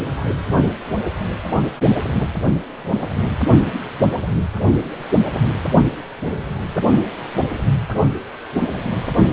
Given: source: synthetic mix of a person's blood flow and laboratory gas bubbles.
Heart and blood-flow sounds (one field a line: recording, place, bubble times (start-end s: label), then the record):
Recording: Doppler ultrasound of blood flow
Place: precordium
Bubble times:
0.17-0.35 s: bubbles
From the record:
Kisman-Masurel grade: 221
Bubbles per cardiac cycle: several, 3 to 8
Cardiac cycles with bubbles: 10 to 50%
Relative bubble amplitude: barely perceptible (0.100 to 0.250)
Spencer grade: 2 (many but less than half of the cardiac periods contain bubble signals, singularly or in groups)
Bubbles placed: only in the low amplitude regions of the cardiac cycle